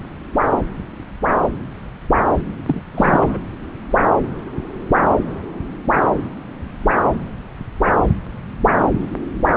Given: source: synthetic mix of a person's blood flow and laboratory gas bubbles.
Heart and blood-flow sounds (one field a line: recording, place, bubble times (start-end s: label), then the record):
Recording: Doppler ultrasound of blood flow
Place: subclavian vein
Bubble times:
2.67-2.82 s: bubbles
2.95-3.38 s: bubbles
From the record:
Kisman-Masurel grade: 222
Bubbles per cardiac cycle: several, 3 to 8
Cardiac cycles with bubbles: 10 to 50%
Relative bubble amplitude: moderate (0.250 to 0.450)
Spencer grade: 2 (many but less than half of the cardiac periods contain bubble signals, singularly or in groups)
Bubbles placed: anywhere in the cardiac cycle